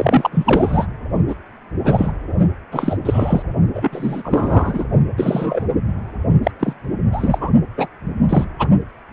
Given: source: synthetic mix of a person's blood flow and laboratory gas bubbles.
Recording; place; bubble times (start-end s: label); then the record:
Doppler ultrasound of blood flow; precordium
0.00-0.28 s: bubbles
0.31-0.86 s: bubbles
1.27-1.34 s: bubbles
1.83-2.12 s: bubbles
2.71-2.98 s: bubbles
3.05-3.42 s: bubbles
3.73-3.90 s: bubbles
3.92-4.85 s: bubbles
5.17-5.66 s: bubbles
6.43-6.51 s: bubbles
6.59-6.73 s: bubbles
7.12-7.51 s: bubbles
7.78-7.88 s: bubbles
8.29-8.45 s: bubbles
8.58-8.68 s: bubbles
From the record:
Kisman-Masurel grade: 243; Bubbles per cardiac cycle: several, 3 to 8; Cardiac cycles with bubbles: 100%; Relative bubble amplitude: loud (0.450 to 0.775); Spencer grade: 3 (all of the cardiac periods contain showers or single bubble signals, but not dominating or overriding the cardiac motion signals); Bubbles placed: only in the low amplitude regions of the cardiac cycle